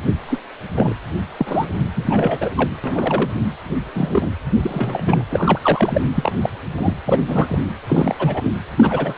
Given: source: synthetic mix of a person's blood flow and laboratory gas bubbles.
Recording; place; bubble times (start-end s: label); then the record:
Doppler ultrasound of blood flow; precordium
0.26-0.40 s: bubbles
0.74-0.94 s: bubbles
1.39-1.69 s: bubbles
1.95-2.49 s: bubbles
2.56-2.69 s: bubbles
2.83-3.31 s: bubbles
3.94-4.33 s: bubbles
4.62-5.24 s: bubbles
5.29-5.59 s: bubbles
5.63-6.01 s: bubbles
6.15-6.33 s: bubbles
6.43-6.50 s: bubbles
6.78-6.94 s: bubbles
7.06-7.58 s: bubbles
7.87-8.15 s: bubbles
8.19-8.51 s: bubbles
8.77-9.14 s: bubbles
From the record:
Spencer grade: 3 (all of the cardiac periods contain showers or single bubble signals, but not dominating or overriding the cardiac motion signals); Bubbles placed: anywhere in the cardiac cycle